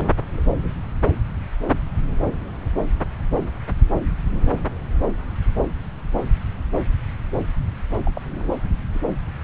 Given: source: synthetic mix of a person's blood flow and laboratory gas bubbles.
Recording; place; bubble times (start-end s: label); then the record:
Doppler ultrasound of blood flow; subclavian vein
0.00-0.12 s: bubbles
0.37-0.41 s: bubbles
0.52-0.57 s: bubbles
0.62-0.69 s: bubbles
8.05-8.11 s: bubbles
8.14-8.45 s: bubbles
8.94-8.99 s: bubbles
From the record:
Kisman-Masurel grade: 221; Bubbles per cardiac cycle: several, 3 to 8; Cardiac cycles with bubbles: 10 to 50%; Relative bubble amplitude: barely perceptible (0.100 to 0.250); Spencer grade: 2 (many but less than half of the cardiac periods contain bubble signals, singularly or in groups); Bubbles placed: anywhere in the cardiac cycle